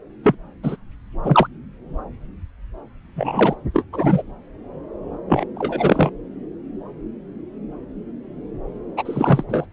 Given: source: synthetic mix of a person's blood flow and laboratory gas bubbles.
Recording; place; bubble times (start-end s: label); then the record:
Doppler ultrasound of blood flow; subclavian vein
0.24-0.35 s: bubbles
0.63-0.76 s: bubbles
1.23-1.47 s: bubbles
3.16-3.56 s: bubbles
3.73-3.84 s: bubbles
3.92-4.22 s: bubbles
5.28-5.45 s: bubbles
5.56-6.11 s: bubbles
8.97-9.44 s: bubbles
9.49-9.65 s: bubbles
From the record:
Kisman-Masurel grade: 223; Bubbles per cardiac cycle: several, 3 to 8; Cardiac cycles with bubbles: 10 to 50%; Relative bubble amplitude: loud (0.450 to 0.775); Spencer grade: 2 (many but less than half of the cardiac periods contain bubble signals, singularly or in groups); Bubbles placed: anywhere in the cardiac cycle